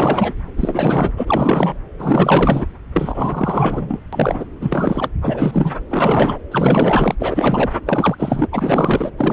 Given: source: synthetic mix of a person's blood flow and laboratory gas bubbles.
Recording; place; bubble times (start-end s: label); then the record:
Doppler ultrasound of blood flow; subclavian vein
0.00-0.32 s: bubbles
0.57-1.11 s: bubbles
1.17-1.77 s: bubbles
1.99-2.66 s: bubbles
2.93-4.00 s: bubbles
4.12-4.45 s: bubbles
4.60-5.09 s: bubbles
5.21-5.76 s: bubbles
5.90-6.38 s: bubbles
6.51-7.15 s: bubbles
7.19-7.71 s: bubbles
7.86-8.15 s: bubbles
8.18-8.47 s: bubbles
8.52-9.11 s: bubbles
9.17-9.33 s: bubbles
From the record:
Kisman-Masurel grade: 444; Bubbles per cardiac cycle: continuous sound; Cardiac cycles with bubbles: 100%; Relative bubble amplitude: maximal (0.775 to 0.999); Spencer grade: 4 (maximum detectable bubble signal sounding continuously throughout systole and diastole of every cardiac period, and overriding the amplitude of the normal cardiac signals); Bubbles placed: anywhere in the cardiac cycle